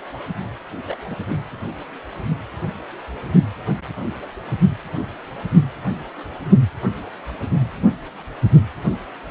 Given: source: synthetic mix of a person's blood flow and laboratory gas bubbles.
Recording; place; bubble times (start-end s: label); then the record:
Doppler ultrasound of blood flow; precordium
0.85-0.96 s: bubbles
0.99-1.02 s: bubbles
1.10-1.15 s: bubbles
From the record:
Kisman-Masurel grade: 121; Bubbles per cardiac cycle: 1 to 2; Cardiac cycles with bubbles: 10 to 50%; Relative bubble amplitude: barely perceptible (0.100 to 0.250); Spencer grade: 2 (many but less than half of the cardiac periods contain bubble signals, singularly or in groups); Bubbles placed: only in the low amplitude regions of the cardiac cycle